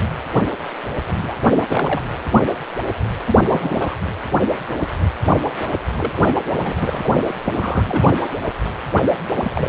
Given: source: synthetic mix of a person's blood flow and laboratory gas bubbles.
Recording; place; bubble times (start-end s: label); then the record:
Doppler ultrasound of blood flow; precordium
1.16-1.35 s: bubbles
1.68-2.02 s: bubbles
3.26-3.37 s: bubbles
3.40-3.95 s: bubbles
5.97-6.11 s: bubbles
6.16-6.40 s: bubbles
6.50-6.75 s: bubbles
6.82-7.34 s: bubbles
7.45-8.17 s: bubbles
9.37-9.69 s: bubbles
From the record:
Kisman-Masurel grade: 232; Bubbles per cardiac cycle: several, 3 to 8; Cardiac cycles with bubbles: 50 to 99%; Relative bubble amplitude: moderate (0.250 to 0.450); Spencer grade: 3 (all of the cardiac periods contain showers or single bubble signals, but not dominating or overriding the cardiac motion signals); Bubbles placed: anywhere in the cardiac cycle